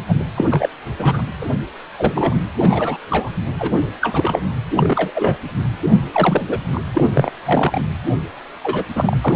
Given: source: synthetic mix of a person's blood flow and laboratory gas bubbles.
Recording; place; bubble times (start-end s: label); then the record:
Doppler ultrasound of blood flow; precordium
0.07-0.14 s: bubbles
0.35-0.45 s: bubbles
0.49-0.69 s: bubbles
0.97-1.22 s: bubbles
1.42-1.47 s: bubbles
1.97-2.36 s: bubbles
2.58-2.97 s: bubbles
3.10-3.29 s: bubbles
3.59-3.72 s: bubbles
4.01-4.41 s: bubbles
4.76-5.11 s: bubbles
5.14-5.36 s: bubbles
6.12-6.42 s: bubbles
6.47-6.59 s: bubbles
6.71-6.80 s: bubbles
6.93-7.04 s: bubbles
7.14-7.30 s: bubbles
7.45-7.82 s: bubbles
8.62-8.84 s: bubbles
8.96-9.17 s: bubbles
9.24-9.36 s: bubbles
From the record:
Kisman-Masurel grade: 243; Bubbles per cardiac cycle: several, 3 to 8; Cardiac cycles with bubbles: 100%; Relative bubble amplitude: loud (0.450 to 0.775); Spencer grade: 3 (all of the cardiac periods contain showers or single bubble signals, but not dominating or overriding the cardiac motion signals); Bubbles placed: anywhere in the cardiac cycle